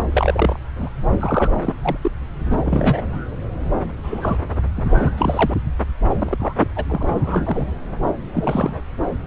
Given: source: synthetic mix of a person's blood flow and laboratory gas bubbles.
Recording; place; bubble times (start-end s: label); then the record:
Doppler ultrasound of blood flow; subclavian vein
0.11-0.59 s: bubbles
0.78-0.90 s: bubbles
0.95-1.54 s: bubbles
1.62-1.75 s: bubbles
1.81-1.97 s: bubbles
2.02-2.11 s: bubbles
2.51-3.23 s: bubbles
4.03-4.38 s: bubbles
4.75-5.54 s: bubbles
6.06-6.54 s: bubbles
6.60-6.67 s: bubbles
6.76-6.85 s: bubbles
6.88-7.03 s: bubbles
7.06-7.67 s: bubbles
8.34-8.75 s: bubbles
From the record:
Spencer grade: 3 (all of the cardiac periods contain showers or single bubble signals, but not dominating or overriding the cardiac motion signals); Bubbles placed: anywhere in the cardiac cycle